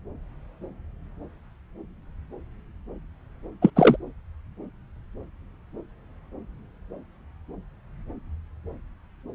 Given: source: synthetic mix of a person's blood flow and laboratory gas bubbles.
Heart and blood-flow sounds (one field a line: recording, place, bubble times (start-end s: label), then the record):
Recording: Doppler ultrasound of blood flow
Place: subclavian vein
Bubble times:
3.62-3.70 s: bubbles
3.76-3.97 s: bubbles
From the record:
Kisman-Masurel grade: 213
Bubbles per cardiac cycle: several, 3 to 8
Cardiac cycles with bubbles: 1 to 10%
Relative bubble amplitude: loud (0.450 to 0.775)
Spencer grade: 1 (occasional bubble signal discernible with the cardiac motion signal, with majority of cardiac periods free of bubbles)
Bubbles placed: anywhere in the cardiac cycle